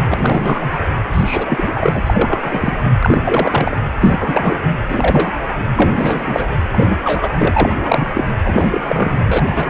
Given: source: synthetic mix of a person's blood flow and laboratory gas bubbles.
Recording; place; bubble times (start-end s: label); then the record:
Doppler ultrasound of blood flow; precordium
0.05-0.79 s: bubbles
1.12-2.02 s: bubbles
2.06-2.73 s: bubbles
2.85-2.92 s: bubbles
3.00-3.76 s: bubbles
4.01-4.61 s: bubbles
4.88-5.33 s: bubbles
5.75-5.91 s: bubbles
5.94-6.57 s: bubbles
6.73-6.96 s: bubbles
7.04-7.35 s: bubbles
7.38-8.25 s: bubbles
8.45-9.20 s: bubbles
9.26-9.70 s: bubbles
From the record:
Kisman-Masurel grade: 343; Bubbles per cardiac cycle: rolling drumbeat, 9 or more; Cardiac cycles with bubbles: 100%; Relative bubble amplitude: loud (0.450 to 0.775); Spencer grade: 3 (all of the cardiac periods contain showers or single bubble signals, but not dominating or overriding the cardiac motion signals); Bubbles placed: anywhere in the cardiac cycle